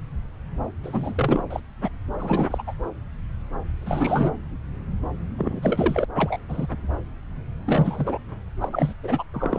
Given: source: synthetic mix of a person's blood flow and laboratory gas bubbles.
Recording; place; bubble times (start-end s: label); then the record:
Doppler ultrasound of blood flow; subclavian vein
0.83-1.43 s: bubbles
1.50-1.60 s: bubbles
1.82-1.89 s: bubbles
2.18-2.62 s: bubbles
2.67-2.74 s: bubbles
3.81-4.33 s: bubbles
5.38-5.60 s: bubbles
5.62-6.05 s: bubbles
6.15-6.38 s: bubbles
6.48-6.67 s: bubbles
7.66-8.18 s: bubbles
8.61-8.69 s: bubbles
8.72-8.93 s: bubbles
9.03-9.23 s: bubbles
9.34-9.58 s: bubbles
From the record:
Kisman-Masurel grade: 232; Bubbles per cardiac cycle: several, 3 to 8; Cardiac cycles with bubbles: 50 to 99%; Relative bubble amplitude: moderate (0.250 to 0.450); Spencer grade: 3 (all of the cardiac periods contain showers or single bubble signals, but not dominating or overriding the cardiac motion signals); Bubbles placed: anywhere in the cardiac cycle